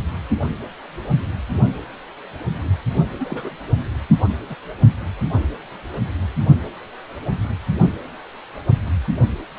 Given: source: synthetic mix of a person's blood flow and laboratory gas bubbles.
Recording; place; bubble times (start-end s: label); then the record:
Doppler ultrasound of blood flow; precordium
3.19-3.56 s: bubbles
4.50-4.56 s: bubbles
From the record:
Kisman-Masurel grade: 211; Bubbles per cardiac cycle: several, 3 to 8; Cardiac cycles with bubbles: 1 to 10%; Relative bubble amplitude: barely perceptible (0.100 to 0.250); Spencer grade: 1 (occasional bubble signal discernible with the cardiac motion signal, with majority of cardiac periods free of bubbles); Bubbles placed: only in the low amplitude regions of the cardiac cycle